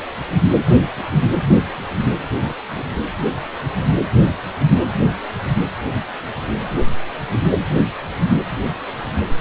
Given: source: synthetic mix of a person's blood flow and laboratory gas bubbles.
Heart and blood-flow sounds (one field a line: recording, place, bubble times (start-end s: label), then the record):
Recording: Doppler ultrasound of blood flow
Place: precordium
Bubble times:
2.43-2.54 s: bubbles
2.75-2.83 s: bubbles
From the record:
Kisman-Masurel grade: 111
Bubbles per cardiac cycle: 1 to 2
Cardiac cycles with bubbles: 1 to 10%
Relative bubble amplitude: barely perceptible (0.100 to 0.250)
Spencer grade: 1 (occasional bubble signal discernible with the cardiac motion signal, with majority of cardiac periods free of bubbles)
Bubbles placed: anywhere in the cardiac cycle